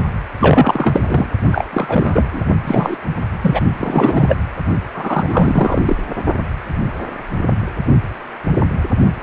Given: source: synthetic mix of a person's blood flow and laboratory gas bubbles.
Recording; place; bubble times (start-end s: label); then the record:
Doppler ultrasound of blood flow; precordium
0.40-1.27 s: bubbles
1.47-1.67 s: bubbles
1.73-2.46 s: bubbles
2.65-2.96 s: bubbles
3.43-3.60 s: bubbles
3.77-4.36 s: bubbles
4.93-5.82 s: bubbles
5.86-5.96 s: bubbles
From the record:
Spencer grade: 3 (all of the cardiac periods contain showers or single bubble signals, but not dominating or overriding the cardiac motion signals); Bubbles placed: only in the low amplitude regions of the cardiac cycle